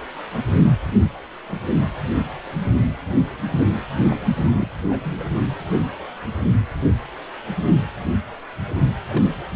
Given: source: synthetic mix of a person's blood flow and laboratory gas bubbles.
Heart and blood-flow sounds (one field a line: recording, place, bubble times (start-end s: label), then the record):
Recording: Doppler ultrasound of blood flow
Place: precordium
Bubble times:
4.09-4.17 s: bubbles
4.34-4.68 s: bubbles
4.90-5.00 s: bubbles
5.05-5.35 s: bubbles
9.08-9.32 s: bubbles
From the record:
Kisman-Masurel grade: 221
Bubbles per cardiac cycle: several, 3 to 8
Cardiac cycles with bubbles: 10 to 50%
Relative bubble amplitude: barely perceptible (0.100 to 0.250)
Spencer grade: 2 (many but less than half of the cardiac periods contain bubble signals, singularly or in groups)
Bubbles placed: anywhere in the cardiac cycle